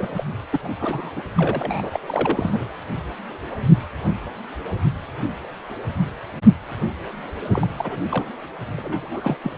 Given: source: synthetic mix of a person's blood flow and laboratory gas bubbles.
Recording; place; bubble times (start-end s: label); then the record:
Doppler ultrasound of blood flow; precordium
0.00-0.25 s: bubbles
0.52-0.60 s: bubbles
0.62-0.72 s: bubbles
0.79-1.11 s: bubbles
1.16-1.22 s: bubbles
1.38-2.73 s: bubbles
7.49-7.67 s: bubbles
7.78-7.98 s: bubbles
8.04-8.33 s: bubbles
8.77-9.38 s: bubbles
9.43-9.58 s: bubbles
From the record:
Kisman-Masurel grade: 332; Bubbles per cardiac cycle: rolling drumbeat, 9 or more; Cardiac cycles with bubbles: 50 to 99%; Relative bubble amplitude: moderate (0.250 to 0.450); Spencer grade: 3 (all of the cardiac periods contain showers or single bubble signals, but not dominating or overriding the cardiac motion signals); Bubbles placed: anywhere in the cardiac cycle